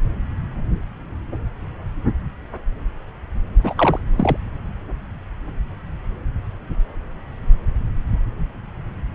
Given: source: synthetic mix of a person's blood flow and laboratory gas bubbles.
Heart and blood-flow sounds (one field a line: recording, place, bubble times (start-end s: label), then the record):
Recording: Doppler ultrasound of blood flow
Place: subclavian vein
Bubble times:
3.63-3.99 s: bubbles
4.17-4.38 s: bubbles
From the record:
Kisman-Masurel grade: 212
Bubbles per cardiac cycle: several, 3 to 8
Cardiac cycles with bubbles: 1 to 10%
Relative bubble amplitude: moderate (0.250 to 0.450)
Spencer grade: 1 (occasional bubble signal discernible with the cardiac motion signal, with majority of cardiac periods free of bubbles)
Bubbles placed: anywhere in the cardiac cycle